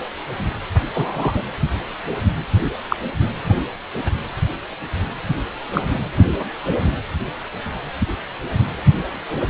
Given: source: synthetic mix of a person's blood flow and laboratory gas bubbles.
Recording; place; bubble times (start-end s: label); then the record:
Doppler ultrasound of blood flow; precordium
0.93-1.44 s: bubbles
2.63-2.71 s: bubbles
2.89-2.97 s: bubbles
5.73-5.82 s: bubbles
From the record:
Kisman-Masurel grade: 123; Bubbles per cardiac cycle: 1 to 2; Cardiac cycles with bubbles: 10 to 50%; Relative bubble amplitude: loud (0.450 to 0.775); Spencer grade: 2 (many but less than half of the cardiac periods contain bubble signals, singularly or in groups); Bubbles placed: anywhere in the cardiac cycle